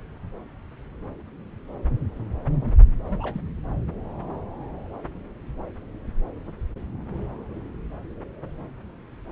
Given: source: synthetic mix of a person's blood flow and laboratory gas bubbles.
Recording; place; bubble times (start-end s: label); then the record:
Doppler ultrasound of blood flow; subclavian vein
3.10-3.41 s: bubbles
From the record:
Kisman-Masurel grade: 211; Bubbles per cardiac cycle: several, 3 to 8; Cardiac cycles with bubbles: 1 to 10%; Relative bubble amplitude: barely perceptible (0.100 to 0.250); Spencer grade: 1 (occasional bubble signal discernible with the cardiac motion signal, with majority of cardiac periods free of bubbles); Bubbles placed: anywhere in the cardiac cycle